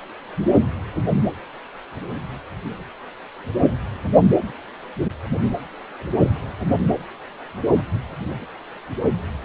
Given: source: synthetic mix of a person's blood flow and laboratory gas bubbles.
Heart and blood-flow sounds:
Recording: Doppler ultrasound of blood flow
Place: precordium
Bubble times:
no bubbles
From the record:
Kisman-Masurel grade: 000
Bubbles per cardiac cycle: 0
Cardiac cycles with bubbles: 0%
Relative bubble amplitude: no bubbles discernible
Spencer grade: 0 (complete lack of bubble signals)

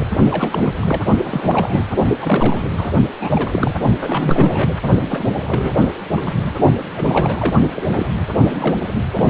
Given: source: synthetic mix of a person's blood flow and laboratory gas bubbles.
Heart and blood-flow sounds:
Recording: Doppler ultrasound of blood flow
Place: precordium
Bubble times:
0.00-0.04 s: bubbles
0.31-0.73 s: bubbles
0.76-1.06 s: bubbles
1.17-1.85 s: bubbles
2.21-2.71 s: bubbles
2.77-2.92 s: bubbles
3.04-3.08 s: bubbles
3.20-3.79 s: bubbles
4.00-4.68 s: bubbles
5.09-5.25 s: bubbles
5.39-5.71 s: bubbles
5.82-5.92 s: bubbles
6.17-6.21 s: bubbles
6.25-6.53 s: bubbles
6.96-7.54 s: bubbles
7.75-7.84 s: bubbles
7.89-8.27 s: bubbles
8.40-8.76 s: bubbles
9.12-9.30 s: bubbles
From the record:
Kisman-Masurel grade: 342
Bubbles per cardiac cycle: rolling drumbeat, 9 or more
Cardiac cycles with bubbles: 100%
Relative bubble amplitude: moderate (0.250 to 0.450)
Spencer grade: 3 (all of the cardiac periods contain showers or single bubble signals, but not dominating or overriding the cardiac motion signals)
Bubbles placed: only in the low amplitude regions of the cardiac cycle

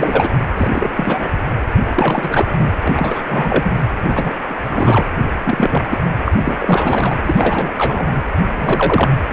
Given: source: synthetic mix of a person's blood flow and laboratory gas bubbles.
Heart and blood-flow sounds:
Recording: Doppler ultrasound of blood flow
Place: precordium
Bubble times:
0.00-0.30 s: bubbles
0.55-1.30 s: bubbles
1.95-2.46 s: bubbles
2.49-2.72 s: bubbles
2.83-3.22 s: bubbles
3.27-3.71 s: bubbles
4.08-4.34 s: bubbles
4.46-5.05 s: bubbles
5.27-5.31 s: bubbles
5.44-5.84 s: bubbles
5.89-5.98 s: bubbles
6.25-6.32 s: bubbles
6.38-7.16 s: bubbles
7.25-7.73 s: bubbles
7.77-8.23 s: bubbles
8.61-9.09 s: bubbles
9.26-9.33 s: bubbles
From the record:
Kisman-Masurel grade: 343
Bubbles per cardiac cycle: rolling drumbeat, 9 or more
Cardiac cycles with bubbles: 100%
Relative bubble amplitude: loud (0.450 to 0.775)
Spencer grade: 3 (all of the cardiac periods contain showers or single bubble signals, but not dominating or overriding the cardiac motion signals)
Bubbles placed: anywhere in the cardiac cycle

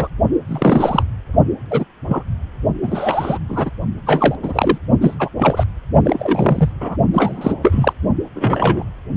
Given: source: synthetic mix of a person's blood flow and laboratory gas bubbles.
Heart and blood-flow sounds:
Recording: Doppler ultrasound of blood flow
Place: precordium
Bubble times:
0.00-0.08 s: bubbles
0.47-1.03 s: bubbles
1.71-1.85 s: bubbles
2.08-2.23 s: bubbles
2.83-3.39 s: bubbles
3.48-3.71 s: bubbles
4.06-4.35 s: bubbles
4.42-4.78 s: bubbles
5.00-5.15 s: bubbles
5.19-5.28 s: bubbles
5.36-5.63 s: bubbles
6.04-6.69 s: bubbles
6.80-6.96 s: bubbles
7.13-7.55 s: bubbles
7.62-7.93 s: bubbles
8.34-8.83 s: bubbles
From the record:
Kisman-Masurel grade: 243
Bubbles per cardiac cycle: several, 3 to 8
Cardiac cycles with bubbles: 100%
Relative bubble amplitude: loud (0.450 to 0.775)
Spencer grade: 3 (all of the cardiac periods contain showers or single bubble signals, but not dominating or overriding the cardiac motion signals)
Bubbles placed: only in the low amplitude regions of the cardiac cycle

